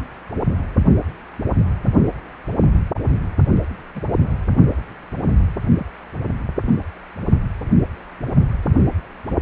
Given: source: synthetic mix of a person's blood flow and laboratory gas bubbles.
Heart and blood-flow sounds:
Doppler ultrasound of blood flow; precordium
3.94-4.00 s: bubbles
5.79-5.86 s: bubbles
6.60-6.73 s: bubbles
From the record:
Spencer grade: 2 (many but less than half of the cardiac periods contain bubble signals, singularly or in groups); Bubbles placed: only in the low amplitude regions of the cardiac cycle

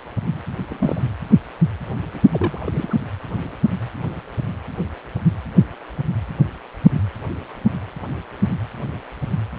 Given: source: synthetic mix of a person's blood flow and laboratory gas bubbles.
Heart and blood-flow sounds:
Doppler ultrasound of blood flow; precordium
0.69-1.08 s: bubbles
2.13-2.19 s: bubbles
2.32-2.95 s: bubbles
From the record:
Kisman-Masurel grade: 221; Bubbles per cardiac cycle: several, 3 to 8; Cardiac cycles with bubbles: 10 to 50%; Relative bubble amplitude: barely perceptible (0.100 to 0.250); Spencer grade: 2 (many but less than half of the cardiac periods contain bubble signals, singularly or in groups); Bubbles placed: anywhere in the cardiac cycle

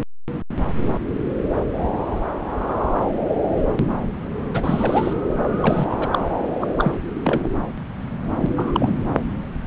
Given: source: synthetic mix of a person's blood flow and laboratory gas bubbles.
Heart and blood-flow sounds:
Doppler ultrasound of blood flow; subclavian vein
4.54-5.13 s: bubbles
5.51-5.87 s: bubbles
5.89-6.08 s: bubbles
6.12-6.19 s: bubbles
6.60-6.67 s: bubbles
6.77-6.92 s: bubbles
7.15-7.21 s: bubbles
7.24-7.47 s: bubbles
8.41-9.02 s: bubbles
From the record:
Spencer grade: 2 (many but less than half of the cardiac periods contain bubble signals, singularly or in groups); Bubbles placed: anywhere in the cardiac cycle

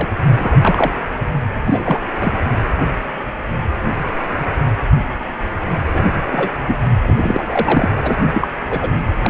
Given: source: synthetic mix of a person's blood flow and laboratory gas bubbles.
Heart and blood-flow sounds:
Doppler ultrasound of blood flow; precordium
0.00-0.08 s: bubbles
0.38-0.57 s: bubbles
0.62-0.93 s: bubbles
1.64-2.00 s: bubbles
2.21-2.32 s: bubbles
5.92-6.04 s: bubbles
6.32-6.52 s: bubbles
6.67-6.78 s: bubbles
7.03-7.17 s: bubbles
7.20-7.42 s: bubbles
7.48-7.90 s: bubbles
8.02-8.16 s: bubbles
8.33-8.48 s: bubbles
8.70-8.89 s: bubbles
9.23-9.30 s: bubbles
From the record:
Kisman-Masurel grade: 233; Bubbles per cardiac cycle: several, 3 to 8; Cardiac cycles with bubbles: 50 to 99%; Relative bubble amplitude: loud (0.450 to 0.775); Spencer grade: 3 (all of the cardiac periods contain showers or single bubble signals, but not dominating or overriding the cardiac motion signals); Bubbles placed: anywhere in the cardiac cycle

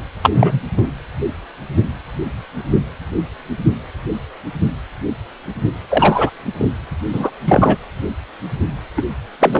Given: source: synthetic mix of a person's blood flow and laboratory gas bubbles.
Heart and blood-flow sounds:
Doppler ultrasound of blood flow; precordium
0.23-0.30 s: bubbles
0.34-0.59 s: bubbles
0.77-0.82 s: bubbles
5.90-6.30 s: bubbles
6.59-6.71 s: bubbles
7.12-7.30 s: bubbles
7.46-7.77 s: bubbles
8.96-9.03 s: bubbles
9.40-9.60 s: bubbles
From the record:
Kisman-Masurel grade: 223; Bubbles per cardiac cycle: several, 3 to 8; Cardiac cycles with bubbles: 10 to 50%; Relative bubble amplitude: loud (0.450 to 0.775); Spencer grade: 2 (many but less than half of the cardiac periods contain bubble signals, singularly or in groups); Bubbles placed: anywhere in the cardiac cycle

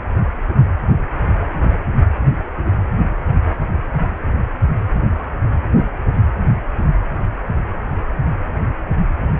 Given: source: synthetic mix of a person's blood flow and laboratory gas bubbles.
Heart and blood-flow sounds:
Doppler ultrasound of blood flow; precordium
2.26-2.31 s: bubbles
2.65-2.71 s: bubbles
From the record:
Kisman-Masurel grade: 111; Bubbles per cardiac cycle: 1 to 2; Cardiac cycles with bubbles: 1 to 10%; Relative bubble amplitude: barely perceptible (0.100 to 0.250); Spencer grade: 1 (occasional bubble signal discernible with the cardiac motion signal, with majority of cardiac periods free of bubbles); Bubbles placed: anywhere in the cardiac cycle

